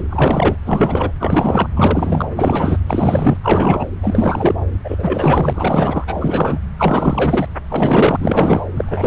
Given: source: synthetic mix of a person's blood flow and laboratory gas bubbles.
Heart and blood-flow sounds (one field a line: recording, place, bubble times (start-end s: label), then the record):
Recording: Doppler ultrasound of blood flow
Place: subclavian vein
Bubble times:
0.00-0.04 s: bubbles
0.10-0.56 s: bubbles
0.65-1.12 s: bubbles
1.20-1.69 s: bubbles
1.76-2.26 s: bubbles
2.36-2.79 s: bubbles
2.86-3.38 s: bubbles
3.42-3.87 s: bubbles
4.02-4.55 s: bubbles
4.84-6.04 s: bubbles
6.07-6.59 s: bubbles
6.78-7.48 s: bubbles
7.70-8.16 s: bubbles
8.20-8.62 s: bubbles
8.77-9.07 s: bubbles
From the record:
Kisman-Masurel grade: 444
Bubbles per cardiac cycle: continuous sound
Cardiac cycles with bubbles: 100%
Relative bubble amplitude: maximal (0.775 to 0.999)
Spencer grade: 4 (maximum detectable bubble signal sounding continuously throughout systole and diastole of every cardiac period, and overriding the amplitude of the normal cardiac signals)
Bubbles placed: anywhere in the cardiac cycle